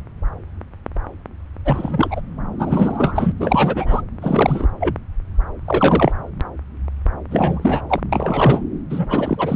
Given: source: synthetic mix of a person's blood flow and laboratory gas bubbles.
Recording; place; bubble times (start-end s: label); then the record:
Doppler ultrasound of blood flow; subclavian vein
1.65-2.21 s: bubbles
2.58-3.32 s: bubbles
3.40-4.01 s: bubbles
4.21-4.68 s: bubbles
4.79-4.95 s: bubbles
5.65-6.12 s: bubbles
7.30-7.82 s: bubbles
7.88-8.00 s: bubbles
8.12-8.62 s: bubbles
8.89-9.56 s: bubbles
From the record:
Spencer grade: 3 (all of the cardiac periods contain showers or single bubble signals, but not dominating or overriding the cardiac motion signals); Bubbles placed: anywhere in the cardiac cycle